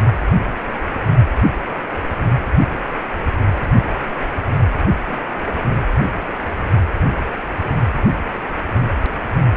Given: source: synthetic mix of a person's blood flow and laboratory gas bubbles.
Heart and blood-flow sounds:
Doppler ultrasound of blood flow; precordium
4.85-4.91 s: bubbles
5.08-5.18 s: bubbles
From the record:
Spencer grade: 1 (occasional bubble signal discernible with the cardiac motion signal, with majority of cardiac periods free of bubbles); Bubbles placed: anywhere in the cardiac cycle

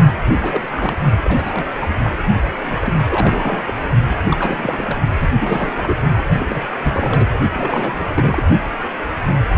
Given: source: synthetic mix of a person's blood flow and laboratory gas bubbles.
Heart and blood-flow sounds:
Doppler ultrasound of blood flow; precordium
0.43-0.97 s: bubbles
1.22-1.86 s: bubbles
1.98-2.10 s: bubbles
2.61-2.77 s: bubbles
2.79-2.93 s: bubbles
3.10-3.74 s: bubbles
4.08-4.17 s: bubbles
4.23-4.97 s: bubbles
5.20-5.29 s: bubbles
5.40-6.25 s: bubbles
6.40-6.67 s: bubbles
6.82-7.27 s: bubbles
7.54-8.44 s: bubbles
From the record:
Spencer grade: 3 (all of the cardiac periods contain showers or single bubble signals, but not dominating or overriding the cardiac motion signals); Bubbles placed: only in the low amplitude regions of the cardiac cycle

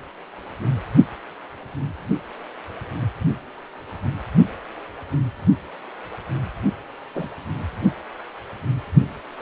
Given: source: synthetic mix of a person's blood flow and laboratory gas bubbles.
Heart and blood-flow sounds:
Doppler ultrasound of blood flow; precordium
7.15-7.28 s: bubbles
From the record:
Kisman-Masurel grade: 122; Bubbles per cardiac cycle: 1 to 2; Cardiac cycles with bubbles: 10 to 50%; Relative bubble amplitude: moderate (0.250 to 0.450); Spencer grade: 2 (many but less than half of the cardiac periods contain bubble signals, singularly or in groups); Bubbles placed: only in the low amplitude regions of the cardiac cycle

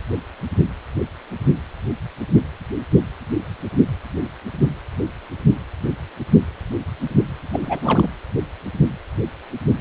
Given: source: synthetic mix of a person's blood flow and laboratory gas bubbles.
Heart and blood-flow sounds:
Doppler ultrasound of blood flow; precordium
7.53-8.07 s: bubbles
From the record:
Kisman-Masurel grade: 222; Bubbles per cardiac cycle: several, 3 to 8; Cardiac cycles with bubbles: 10 to 50%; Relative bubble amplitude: moderate (0.250 to 0.450); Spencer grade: 2 (many but less than half of the cardiac periods contain bubble signals, singularly or in groups); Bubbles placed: anywhere in the cardiac cycle

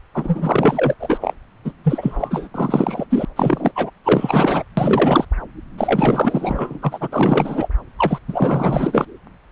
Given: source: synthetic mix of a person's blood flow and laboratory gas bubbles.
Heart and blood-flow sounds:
Doppler ultrasound of blood flow; subclavian vein
0.14-0.94 s: bubbles
0.99-1.18 s: bubbles
1.20-1.34 s: bubbles
1.65-1.73 s: bubbles
1.83-2.48 s: bubbles
2.54-3.06 s: bubbles
3.09-3.25 s: bubbles
3.36-3.72 s: bubbles
3.75-3.90 s: bubbles
4.04-4.63 s: bubbles
4.77-5.25 s: bubbles
5.78-6.79 s: bubbles
6.82-7.09 s: bubbles
7.12-7.69 s: bubbles
7.98-8.18 s: bubbles
8.28-9.06 s: bubbles
From the record:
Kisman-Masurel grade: 444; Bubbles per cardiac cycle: continuous sound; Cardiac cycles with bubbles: 100%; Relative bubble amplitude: maximal (0.775 to 0.999); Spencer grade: 4 (maximum detectable bubble signal sounding continuously throughout systole and diastole of every cardiac period, and overriding the amplitude of the normal cardiac signals); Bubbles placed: anywhere in the cardiac cycle

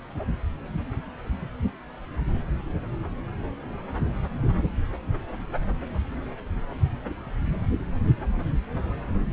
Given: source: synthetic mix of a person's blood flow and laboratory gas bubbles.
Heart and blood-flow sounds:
Doppler ultrasound of blood flow; subclavian vein
no bubbles
From the record:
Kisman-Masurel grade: 000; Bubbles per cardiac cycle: 0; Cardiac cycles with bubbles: 0%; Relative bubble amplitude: no bubbles discernible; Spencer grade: 0 (complete lack of bubble signals)

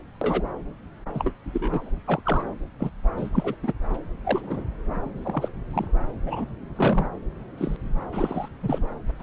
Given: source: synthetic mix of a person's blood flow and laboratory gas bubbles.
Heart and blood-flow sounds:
Doppler ultrasound of blood flow; subclavian vein
0.21-0.42 s: bubbles
1.14-1.32 s: bubbles
1.45-1.92 s: bubbles
2.05-2.22 s: bubbles
2.24-2.44 s: bubbles
2.79-2.90 s: bubbles
3.17-3.55 s: bubbles
3.62-3.73 s: bubbles
4.24-4.63 s: bubbles
5.04-5.50 s: bubbles
5.74-5.88 s: bubbles
6.25-6.46 s: bubbles
6.75-7.08 s: bubbles
7.58-7.77 s: bubbles
8.12-8.48 s: bubbles
8.62-8.84 s: bubbles
9.10-9.12 s: bubbles
9.19-9.23 s: bubbles
From the record:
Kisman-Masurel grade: 242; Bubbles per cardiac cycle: several, 3 to 8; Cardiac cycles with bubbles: 100%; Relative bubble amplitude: moderate (0.250 to 0.450); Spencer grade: 3 (all of the cardiac periods contain showers or single bubble signals, but not dominating or overriding the cardiac motion signals); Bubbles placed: anywhere in the cardiac cycle

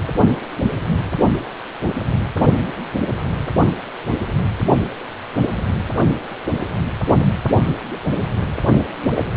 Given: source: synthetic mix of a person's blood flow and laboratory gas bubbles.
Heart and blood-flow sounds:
Doppler ultrasound of blood flow; precordium
9.15-9.24 s: bubbles
From the record:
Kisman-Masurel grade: 112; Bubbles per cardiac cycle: 1 to 2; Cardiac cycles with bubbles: 1 to 10%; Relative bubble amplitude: moderate (0.250 to 0.450); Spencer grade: 1 (occasional bubble signal discernible with the cardiac motion signal, with majority of cardiac periods free of bubbles); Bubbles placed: only in the low amplitude regions of the cardiac cycle

